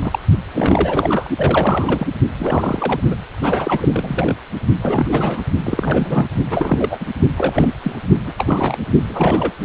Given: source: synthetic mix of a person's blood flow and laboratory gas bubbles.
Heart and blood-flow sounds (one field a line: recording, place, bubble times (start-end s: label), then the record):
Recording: Doppler ultrasound of blood flow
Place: precordium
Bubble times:
0.00-0.19 s: bubbles
0.55-1.29 s: bubbles
1.37-2.07 s: bubbles
2.40-3.00 s: bubbles
3.10-3.15 s: bubbles
3.40-3.88 s: bubbles
3.92-4.35 s: bubbles
4.82-5.40 s: bubbles
5.63-6.29 s: bubbles
6.50-7.06 s: bubbles
7.37-7.72 s: bubbles
7.83-7.95 s: bubbles
8.26-8.33 s: bubbles
8.38-8.78 s: bubbles
9.09-9.54 s: bubbles
From the record:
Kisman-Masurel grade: 342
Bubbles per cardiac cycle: rolling drumbeat, 9 or more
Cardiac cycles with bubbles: 100%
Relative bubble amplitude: moderate (0.250 to 0.450)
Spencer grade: 3 (all of the cardiac periods contain showers or single bubble signals, but not dominating or overriding the cardiac motion signals)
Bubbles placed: only in the low amplitude regions of the cardiac cycle